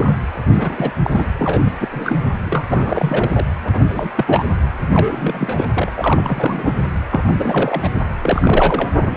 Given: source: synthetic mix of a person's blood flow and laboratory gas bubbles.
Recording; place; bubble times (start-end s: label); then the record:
Doppler ultrasound of blood flow; precordium
0.00-0.20 s: bubbles
0.52-0.94 s: bubbles
1.03-1.27 s: bubbles
1.38-1.72 s: bubbles
1.80-1.89 s: bubbles
1.92-2.21 s: bubbles
2.45-3.46 s: bubbles
3.64-3.79 s: bubbles
3.88-4.10 s: bubbles
4.15-4.44 s: bubbles
4.90-5.66 s: bubbles
5.73-5.92 s: bubbles
5.94-6.81 s: bubbles
7.09-7.24 s: bubbles
7.27-7.33 s: bubbles
7.38-7.89 s: bubbles
8.19-8.89 s: bubbles
8.99-9.17 s: bubbles
From the record:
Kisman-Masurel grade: 342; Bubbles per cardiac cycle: rolling drumbeat, 9 or more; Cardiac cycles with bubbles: 100%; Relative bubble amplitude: moderate (0.250 to 0.450); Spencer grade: 3 (all of the cardiac periods contain showers or single bubble signals, but not dominating or overriding the cardiac motion signals); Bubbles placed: anywhere in the cardiac cycle